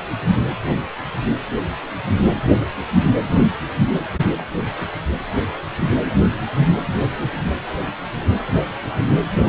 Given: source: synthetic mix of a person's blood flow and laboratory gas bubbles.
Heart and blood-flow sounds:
Doppler ultrasound of blood flow; precordium
no bubbles
From the record:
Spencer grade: 0 (complete lack of bubble signals)

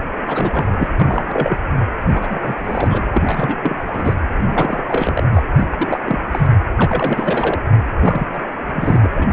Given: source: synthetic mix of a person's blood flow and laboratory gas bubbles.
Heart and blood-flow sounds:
Doppler ultrasound of blood flow; precordium
0.26-0.88 s: bubbles
0.99-1.58 s: bubbles
2.10-2.56 s: bubbles
2.64-3.02 s: bubbles
3.14-3.56 s: bubbles
3.62-3.83 s: bubbles
3.87-4.16 s: bubbles
4.38-4.84 s: bubbles
4.88-5.24 s: bubbles
5.32-5.42 s: bubbles
5.56-5.66 s: bubbles
5.71-5.99 s: bubbles
6.05-6.21 s: bubbles
6.31-6.47 s: bubbles
6.75-7.60 s: bubbles
7.99-8.26 s: bubbles
8.33-8.43 s: bubbles
8.67-9.07 s: bubbles
9.15-9.27 s: bubbles
From the record:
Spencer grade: 3 (all of the cardiac periods contain showers or single bubble signals, but not dominating or overriding the cardiac motion signals); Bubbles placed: anywhere in the cardiac cycle

